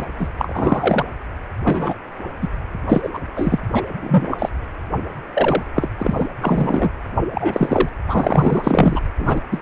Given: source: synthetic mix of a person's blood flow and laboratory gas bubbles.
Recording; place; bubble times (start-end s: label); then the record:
Doppler ultrasound of blood flow; precordium
0.00-0.06 s: bubbles
0.18-0.28 s: bubbles
0.38-1.05 s: bubbles
1.65-1.95 s: bubbles
2.41-2.47 s: bubbles
2.88-3.09 s: bubbles
3.13-3.19 s: bubbles
3.34-3.59 s: bubbles
3.73-3.81 s: bubbles
4.02-4.49 s: bubbles
5.33-5.64 s: bubbles
5.75-5.89 s: bubbles
5.98-6.27 s: bubbles
6.41-6.90 s: bubbles
7.34-7.89 s: bubbles
8.07-9.00 s: bubbles
9.19-9.40 s: bubbles
9.51-9.61 s: bubbles
From the record:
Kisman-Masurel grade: 233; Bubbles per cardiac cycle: several, 3 to 8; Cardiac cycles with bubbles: 50 to 99%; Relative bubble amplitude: loud (0.450 to 0.775); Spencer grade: 3 (all of the cardiac periods contain showers or single bubble signals, but not dominating or overriding the cardiac motion signals); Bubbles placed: anywhere in the cardiac cycle